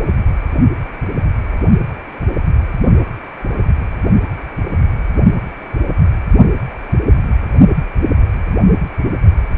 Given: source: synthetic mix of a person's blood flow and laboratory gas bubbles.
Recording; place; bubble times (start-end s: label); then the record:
Doppler ultrasound of blood flow; precordium
no bubbles
From the record:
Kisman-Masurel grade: 000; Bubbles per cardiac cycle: 0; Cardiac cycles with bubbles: 0%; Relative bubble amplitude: no bubbles discernible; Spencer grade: 0 (complete lack of bubble signals)